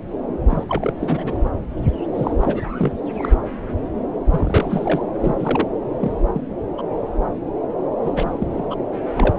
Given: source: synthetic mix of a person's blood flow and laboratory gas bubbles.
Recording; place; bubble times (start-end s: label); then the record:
Doppler ultrasound of blood flow; subclavian vein
0.49-0.64 s: bubbles
0.69-0.93 s: bubbles
1.00-1.38 s: bubbles
2.14-2.36 s: bubbles
2.40-2.70 s: bubbles
2.77-2.92 s: bubbles
3.17-3.40 s: bubbles
4.29-5.01 s: bubbles
5.20-5.35 s: bubbles
5.39-5.69 s: bubbles
6.00-6.20 s: bubbles
6.33-6.42 s: bubbles
6.77-6.82 s: bubbles
8.02-8.77 s: bubbles
9.15-9.39 s: bubbles
From the record:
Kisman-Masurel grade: 232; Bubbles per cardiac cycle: several, 3 to 8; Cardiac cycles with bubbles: 50 to 99%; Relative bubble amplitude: moderate (0.250 to 0.450); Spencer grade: 3 (all of the cardiac periods contain showers or single bubble signals, but not dominating or overriding the cardiac motion signals); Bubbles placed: anywhere in the cardiac cycle